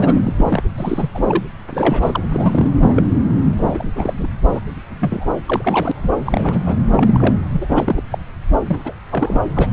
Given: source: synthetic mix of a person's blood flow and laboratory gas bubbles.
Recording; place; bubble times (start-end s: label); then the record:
Doppler ultrasound of blood flow; subclavian vein
0.00-0.34 s: bubbles
0.36-0.62 s: bubbles
0.78-1.10 s: bubbles
1.15-1.42 s: bubbles
1.71-2.23 s: bubbles
2.31-2.71 s: bubbles
2.79-3.08 s: bubbles
3.56-3.88 s: bubbles
3.96-4.13 s: bubbles
4.19-4.27 s: bubbles
4.51-4.60 s: bubbles
5.00-5.26 s: bubbles
5.47-5.92 s: bubbles
6.03-6.10 s: bubbles
6.25-6.62 s: bubbles
6.66-6.79 s: bubbles
6.92-7.37 s: bubbles
7.51-7.66 s: bubbles
7.68-8.03 s: bubbles
8.11-8.18 s: bubbles
8.67-8.92 s: bubbles
9.10-9.41 s: bubbles
9.55-9.73 s: bubbles
From the record:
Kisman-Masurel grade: 342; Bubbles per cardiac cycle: rolling drumbeat, 9 or more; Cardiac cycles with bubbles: 100%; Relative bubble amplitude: moderate (0.250 to 0.450); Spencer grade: 3 (all of the cardiac periods contain showers or single bubble signals, but not dominating or overriding the cardiac motion signals); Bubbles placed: anywhere in the cardiac cycle